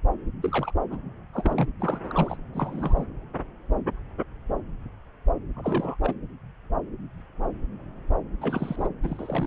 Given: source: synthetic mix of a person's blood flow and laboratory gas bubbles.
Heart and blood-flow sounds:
Doppler ultrasound of blood flow; subclavian vein
0.43-0.72 s: bubbles
0.90-0.97 s: bubbles
1.32-1.69 s: bubbles
1.79-2.00 s: bubbles
2.03-2.37 s: bubbles
2.53-3.04 s: bubbles
5.56-5.96 s: bubbles
6.03-6.14 s: bubbles
8.41-8.88 s: bubbles
9.03-9.47 s: bubbles
From the record:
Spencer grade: 3 (all of the cardiac periods contain showers or single bubble signals, but not dominating or overriding the cardiac motion signals); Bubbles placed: anywhere in the cardiac cycle

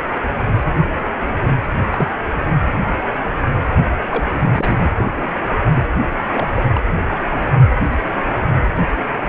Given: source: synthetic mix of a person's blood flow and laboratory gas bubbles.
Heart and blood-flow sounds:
Doppler ultrasound of blood flow; precordium
1.91-2.08 s: bubbles
3.97-4.04 s: bubbles
4.08-4.90 s: bubbles
4.94-5.29 s: bubbles
5.73-5.82 s: bubbles
6.33-6.48 s: bubbles
6.55-6.62 s: bubbles
6.71-6.81 s: bubbles
From the record:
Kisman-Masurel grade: 222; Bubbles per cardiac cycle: several, 3 to 8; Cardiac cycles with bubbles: 10 to 50%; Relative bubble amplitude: moderate (0.250 to 0.450); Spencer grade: 2 (many but less than half of the cardiac periods contain bubble signals, singularly or in groups); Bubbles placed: anywhere in the cardiac cycle

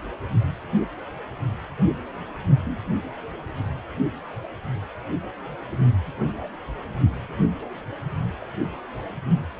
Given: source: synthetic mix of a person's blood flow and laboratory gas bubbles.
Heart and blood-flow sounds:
Doppler ultrasound of blood flow; precordium
2.63-2.78 s: bubbles
8.41-8.45 s: bubbles
From the record:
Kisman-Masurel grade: 121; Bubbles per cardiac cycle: 1 to 2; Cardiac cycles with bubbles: 10 to 50%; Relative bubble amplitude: barely perceptible (0.100 to 0.250); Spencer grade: 2 (many but less than half of the cardiac periods contain bubble signals, singularly or in groups); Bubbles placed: only in the low amplitude regions of the cardiac cycle

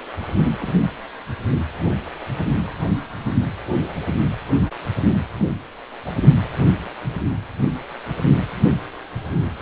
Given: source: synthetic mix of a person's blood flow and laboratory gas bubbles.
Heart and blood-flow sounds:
Doppler ultrasound of blood flow; precordium
0.59-0.73 s: bubbles
1.53-1.58 s: bubbles
5.38-5.45 s: bubbles
6.05-6.11 s: bubbles
From the record:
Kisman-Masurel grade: 121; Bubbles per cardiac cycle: 1 to 2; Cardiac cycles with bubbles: 10 to 50%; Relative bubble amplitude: barely perceptible (0.100 to 0.250); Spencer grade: 2 (many but less than half of the cardiac periods contain bubble signals, singularly or in groups); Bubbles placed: anywhere in the cardiac cycle

